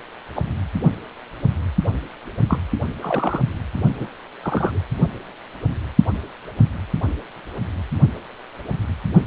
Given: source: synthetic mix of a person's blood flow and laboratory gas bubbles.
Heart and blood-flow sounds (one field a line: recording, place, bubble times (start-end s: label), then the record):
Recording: Doppler ultrasound of blood flow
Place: precordium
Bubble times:
0.35-0.42 s: bubbles
2.49-2.58 s: bubbles
3.01-3.44 s: bubbles
3.99-4.08 s: bubbles
4.42-4.80 s: bubbles
From the record:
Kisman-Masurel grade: 122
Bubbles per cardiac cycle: 1 to 2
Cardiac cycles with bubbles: 10 to 50%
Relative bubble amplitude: moderate (0.250 to 0.450)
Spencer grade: 2 (many but less than half of the cardiac periods contain bubble signals, singularly or in groups)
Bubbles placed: only in the low amplitude regions of the cardiac cycle